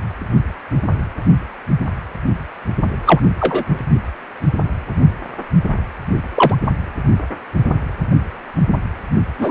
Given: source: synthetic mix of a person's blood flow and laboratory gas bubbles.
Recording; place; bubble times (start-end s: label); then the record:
Doppler ultrasound of blood flow; precordium
3.06-3.21 s: bubbles
3.40-3.64 s: bubbles
6.34-6.55 s: bubbles
9.38-9.51 s: bubbles
From the record:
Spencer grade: 2 (many but less than half of the cardiac periods contain bubble signals, singularly or in groups); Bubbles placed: only in the low amplitude regions of the cardiac cycle